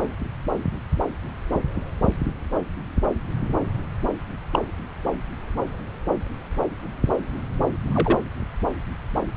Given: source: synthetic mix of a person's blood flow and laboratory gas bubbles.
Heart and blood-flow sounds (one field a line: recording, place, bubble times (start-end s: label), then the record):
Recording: Doppler ultrasound of blood flow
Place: subclavian vein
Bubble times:
4.53-4.59 s: bubbles
7.87-8.19 s: bubbles
From the record:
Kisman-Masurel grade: 122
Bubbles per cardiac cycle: 1 to 2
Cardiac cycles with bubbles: 10 to 50%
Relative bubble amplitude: moderate (0.250 to 0.450)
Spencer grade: 2 (many but less than half of the cardiac periods contain bubble signals, singularly or in groups)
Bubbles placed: anywhere in the cardiac cycle